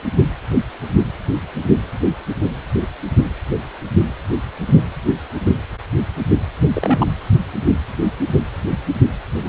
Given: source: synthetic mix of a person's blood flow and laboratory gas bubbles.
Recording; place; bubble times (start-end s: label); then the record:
Doppler ultrasound of blood flow; precordium
6.74-7.07 s: bubbles
9.42-9.49 s: bubbles
From the record:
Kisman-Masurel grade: 122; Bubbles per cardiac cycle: 1 to 2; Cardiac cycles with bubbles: 10 to 50%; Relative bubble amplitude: moderate (0.250 to 0.450); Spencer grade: 2 (many but less than half of the cardiac periods contain bubble signals, singularly or in groups); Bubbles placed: anywhere in the cardiac cycle